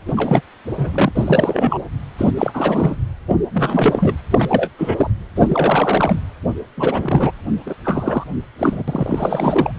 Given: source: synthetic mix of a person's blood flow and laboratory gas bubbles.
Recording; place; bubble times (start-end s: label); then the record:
Doppler ultrasound of blood flow; precordium
0.07-0.14 s: bubbles
0.16-0.41 s: bubbles
0.77-1.12 s: bubbles
1.16-1.78 s: bubbles
2.17-2.31 s: bubbles
2.36-2.96 s: bubbles
3.29-3.36 s: bubbles
3.54-4.14 s: bubbles
4.30-4.70 s: bubbles
4.78-5.10 s: bubbles
5.35-6.20 s: bubbles
6.76-7.31 s: bubbles
7.66-7.75 s: bubbles
7.84-8.24 s: bubbles
8.58-8.83 s: bubbles
8.88-9.72 s: bubbles
From the record:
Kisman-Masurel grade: 343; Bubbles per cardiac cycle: rolling drumbeat, 9 or more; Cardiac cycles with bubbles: 100%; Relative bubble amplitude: loud (0.450 to 0.775); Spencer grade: 3 (all of the cardiac periods contain showers or single bubble signals, but not dominating or overriding the cardiac motion signals); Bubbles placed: anywhere in the cardiac cycle